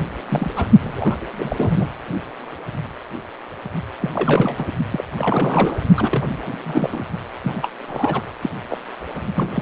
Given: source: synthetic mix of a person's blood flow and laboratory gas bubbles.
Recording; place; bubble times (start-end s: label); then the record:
Doppler ultrasound of blood flow; precordium
0.00-0.03 s: bubbles
0.30-0.50 s: bubbles
0.55-0.67 s: bubbles
0.81-1.27 s: bubbles
1.39-1.89 s: bubbles
4.00-4.10 s: bubbles
4.13-4.75 s: bubbles
4.91-5.02 s: bubbles
5.16-5.77 s: bubbles
5.96-6.24 s: bubbles
6.29-6.37 s: bubbles
6.46-6.56 s: bubbles
6.65-7.05 s: bubbles
7.43-7.68 s: bubbles
7.79-8.22 s: bubbles
8.41-8.50 s: bubbles
8.69-8.78 s: bubbles
9.36-9.61 s: bubbles
From the record:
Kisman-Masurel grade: 332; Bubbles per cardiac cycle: rolling drumbeat, 9 or more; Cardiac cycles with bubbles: 50 to 99%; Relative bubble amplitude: moderate (0.250 to 0.450); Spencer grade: 3 (all of the cardiac periods contain showers or single bubble signals, but not dominating or overriding the cardiac motion signals); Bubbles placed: only in the low amplitude regions of the cardiac cycle